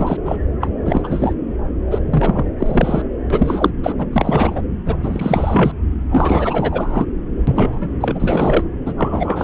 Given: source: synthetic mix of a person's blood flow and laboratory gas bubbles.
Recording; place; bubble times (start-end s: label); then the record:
Doppler ultrasound of blood flow; subclavian vein
0.00-0.17 s: bubbles
0.25-0.37 s: bubbles
0.60-0.70 s: bubbles
0.85-1.33 s: bubbles
1.91-2.00 s: bubbles
2.10-2.43 s: bubbles
2.58-3.02 s: bubbles
3.30-3.71 s: bubbles
3.83-3.92 s: bubbles
3.98-4.05 s: bubbles
4.12-4.62 s: bubbles
4.85-4.96 s: bubbles
5.00-5.72 s: bubbles
6.09-7.06 s: bubbles
7.47-7.90 s: bubbles
8.00-8.63 s: bubbles
8.86-8.93 s: bubbles
8.97-9.44 s: bubbles
From the record:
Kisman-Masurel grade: 343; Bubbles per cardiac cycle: rolling drumbeat, 9 or more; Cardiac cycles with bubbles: 100%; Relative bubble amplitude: loud (0.450 to 0.775); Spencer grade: 3 (all of the cardiac periods contain showers or single bubble signals, but not dominating or overriding the cardiac motion signals); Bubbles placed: anywhere in the cardiac cycle